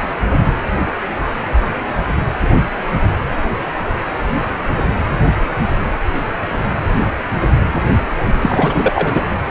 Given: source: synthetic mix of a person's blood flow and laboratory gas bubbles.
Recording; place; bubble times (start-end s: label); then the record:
Doppler ultrasound of blood flow; precordium
8.39-9.22 s: bubbles
From the record:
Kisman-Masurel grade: 213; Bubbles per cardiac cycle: several, 3 to 8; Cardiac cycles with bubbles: 1 to 10%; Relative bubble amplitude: loud (0.450 to 0.775); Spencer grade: 1 (occasional bubble signal discernible with the cardiac motion signal, with majority of cardiac periods free of bubbles); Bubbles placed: anywhere in the cardiac cycle